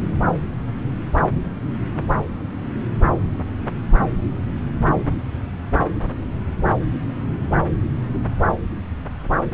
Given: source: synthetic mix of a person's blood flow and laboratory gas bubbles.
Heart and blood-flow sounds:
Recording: Doppler ultrasound of blood flow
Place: subclavian vein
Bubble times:
no bubbles
From the record:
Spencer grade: 0 (complete lack of bubble signals)

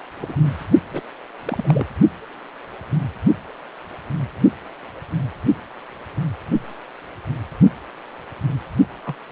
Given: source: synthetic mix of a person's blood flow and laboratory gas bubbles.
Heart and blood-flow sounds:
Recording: Doppler ultrasound of blood flow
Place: precordium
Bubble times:
0.19-0.35 s: bubbles
0.90-1.03 s: bubbles
1.45-1.86 s: bubbles
9.05-9.14 s: bubbles
9.29-9.32 s: bubbles
From the record:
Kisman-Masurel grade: 221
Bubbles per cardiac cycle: several, 3 to 8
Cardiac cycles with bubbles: 10 to 50%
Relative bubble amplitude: barely perceptible (0.100 to 0.250)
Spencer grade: 2 (many but less than half of the cardiac periods contain bubble signals, singularly or in groups)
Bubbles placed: anywhere in the cardiac cycle

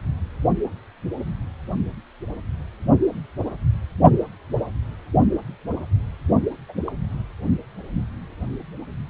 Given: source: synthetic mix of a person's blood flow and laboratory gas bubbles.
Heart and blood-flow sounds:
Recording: Doppler ultrasound of blood flow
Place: precordium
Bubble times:
6.68-6.73 s: bubbles
6.86-6.92 s: bubbles
From the record:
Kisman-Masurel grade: 111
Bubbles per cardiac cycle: 1 to 2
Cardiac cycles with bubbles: 1 to 10%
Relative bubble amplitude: barely perceptible (0.100 to 0.250)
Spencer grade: 1 (occasional bubble signal discernible with the cardiac motion signal, with majority of cardiac periods free of bubbles)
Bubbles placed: only in the low amplitude regions of the cardiac cycle

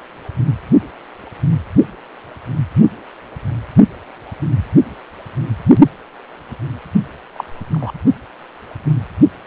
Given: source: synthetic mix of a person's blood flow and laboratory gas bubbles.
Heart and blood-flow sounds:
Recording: Doppler ultrasound of blood flow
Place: precordium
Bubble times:
7.34-7.44 s: bubbles
7.73-7.92 s: bubbles
From the record:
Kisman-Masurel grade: 112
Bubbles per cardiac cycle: 1 to 2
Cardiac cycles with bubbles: 1 to 10%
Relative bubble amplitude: moderate (0.250 to 0.450)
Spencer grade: 1 (occasional bubble signal discernible with the cardiac motion signal, with majority of cardiac periods free of bubbles)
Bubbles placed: only in the low amplitude regions of the cardiac cycle

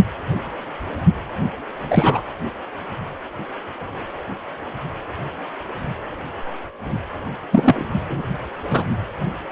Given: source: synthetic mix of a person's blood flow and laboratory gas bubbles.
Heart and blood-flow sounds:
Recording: Doppler ultrasound of blood flow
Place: precordium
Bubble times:
1.82-2.21 s: bubbles
7.51-7.85 s: bubbles
8.09-8.21 s: bubbles
8.70-8.85 s: bubbles
From the record:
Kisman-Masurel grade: 223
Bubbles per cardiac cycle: several, 3 to 8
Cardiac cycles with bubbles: 10 to 50%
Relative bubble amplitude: loud (0.450 to 0.775)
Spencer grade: 2 (many but less than half of the cardiac periods contain bubble signals, singularly or in groups)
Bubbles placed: anywhere in the cardiac cycle

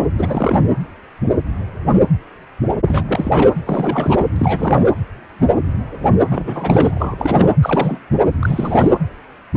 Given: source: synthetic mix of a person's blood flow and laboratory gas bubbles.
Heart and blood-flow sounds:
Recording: Doppler ultrasound of blood flow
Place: precordium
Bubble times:
0.16-0.60 s: bubbles
2.86-3.04 s: bubbles
3.08-3.51 s: bubbles
3.66-4.26 s: bubbles
4.36-4.83 s: bubbles
6.29-7.53 s: bubbles
7.62-8.00 s: bubbles
8.39-8.90 s: bubbles
From the record:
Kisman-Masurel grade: 332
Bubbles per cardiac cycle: rolling drumbeat, 9 or more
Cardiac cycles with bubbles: 50 to 99%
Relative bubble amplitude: moderate (0.250 to 0.450)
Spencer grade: 3 (all of the cardiac periods contain showers or single bubble signals, but not dominating or overriding the cardiac motion signals)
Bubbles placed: anywhere in the cardiac cycle

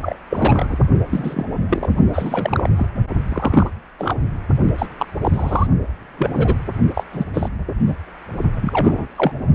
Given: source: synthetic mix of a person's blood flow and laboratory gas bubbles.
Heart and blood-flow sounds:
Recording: Doppler ultrasound of blood flow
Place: precordium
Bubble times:
0.02-0.16 s: bubbles
0.29-0.84 s: bubbles
1.09-1.46 s: bubbles
1.69-1.90 s: bubbles
2.12-2.69 s: bubbles
2.76-2.86 s: bubbles
3.29-3.70 s: bubbles
3.98-4.16 s: bubbles
4.78-4.86 s: bubbles
4.99-5.06 s: bubbles
5.22-5.67 s: bubbles
6.17-6.30 s: bubbles
6.37-6.55 s: bubbles
6.94-7.04 s: bubbles
7.12-7.25 s: bubbles
7.33-7.49 s: bubbles
7.86-7.94 s: bubbles
8.54-9.07 s: bubbles
9.16-9.31 s: bubbles
From the record:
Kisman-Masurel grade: 243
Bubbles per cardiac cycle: several, 3 to 8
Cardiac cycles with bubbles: 100%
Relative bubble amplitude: loud (0.450 to 0.775)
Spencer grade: 3 (all of the cardiac periods contain showers or single bubble signals, but not dominating or overriding the cardiac motion signals)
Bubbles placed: only in the low amplitude regions of the cardiac cycle

